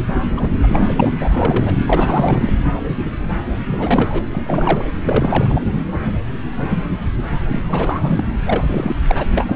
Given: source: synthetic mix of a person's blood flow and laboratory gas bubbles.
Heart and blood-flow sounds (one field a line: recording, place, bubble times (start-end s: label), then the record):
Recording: Doppler ultrasound of blood flow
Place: subclavian vein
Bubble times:
0.36-0.52 s: bubbles
0.62-1.11 s: bubbles
1.20-1.74 s: bubbles
1.85-2.53 s: bubbles
3.67-4.25 s: bubbles
4.32-4.85 s: bubbles
5.04-5.62 s: bubbles
7.51-8.00 s: bubbles
8.03-8.24 s: bubbles
8.45-8.96 s: bubbles
9.08-9.26 s: bubbles
9.37-9.56 s: bubbles
From the record:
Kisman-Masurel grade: 332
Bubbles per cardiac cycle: rolling drumbeat, 9 or more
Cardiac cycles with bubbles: 50 to 99%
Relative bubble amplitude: moderate (0.250 to 0.450)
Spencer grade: 3 (all of the cardiac periods contain showers or single bubble signals, but not dominating or overriding the cardiac motion signals)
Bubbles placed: anywhere in the cardiac cycle